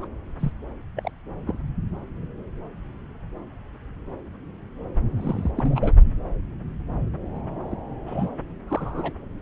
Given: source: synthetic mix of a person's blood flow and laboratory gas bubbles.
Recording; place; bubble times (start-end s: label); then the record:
Doppler ultrasound of blood flow; subclavian vein
0.00-0.07 s: bubbles
0.40-0.52 s: bubbles
0.96-1.10 s: bubbles
1.47-1.59 s: bubbles
5.16-5.51 s: bubbles
5.57-5.92 s: bubbles
7.34-7.39 s: bubbles
7.71-7.78 s: bubbles
8.06-8.28 s: bubbles
8.68-9.13 s: bubbles
From the record:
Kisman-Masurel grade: 232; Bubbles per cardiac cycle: several, 3 to 8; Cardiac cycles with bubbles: 50 to 99%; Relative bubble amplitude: moderate (0.250 to 0.450); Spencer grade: 3 (all of the cardiac periods contain showers or single bubble signals, but not dominating or overriding the cardiac motion signals); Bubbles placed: anywhere in the cardiac cycle